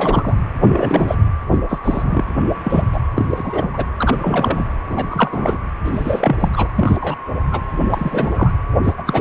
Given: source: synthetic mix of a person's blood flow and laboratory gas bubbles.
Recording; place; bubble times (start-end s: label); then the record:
Doppler ultrasound of blood flow; precordium
0.00-0.35 s: bubbles
0.62-1.16 s: bubbles
1.51-1.58 s: bubbles
1.68-1.78 s: bubbles
1.81-2.24 s: bubbles
2.63-2.85 s: bubbles
2.92-3.00 s: bubbles
3.16-3.69 s: bubbles
3.73-3.85 s: bubbles
3.97-4.17 s: bubbles
4.19-4.66 s: bubbles
4.89-5.57 s: bubbles
5.84-6.36 s: bubbles
6.39-6.50 s: bubbles
6.52-6.67 s: bubbles
6.76-7.15 s: bubbles
7.51-7.61 s: bubbles
7.90-8.52 s: bubbles
8.82-8.93 s: bubbles
8.97-9.03 s: bubbles
9.06-9.21 s: bubbles
From the record:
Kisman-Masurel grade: 242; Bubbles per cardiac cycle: several, 3 to 8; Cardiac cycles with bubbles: 100%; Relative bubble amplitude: moderate (0.250 to 0.450); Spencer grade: 3 (all of the cardiac periods contain showers or single bubble signals, but not dominating or overriding the cardiac motion signals); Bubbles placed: anywhere in the cardiac cycle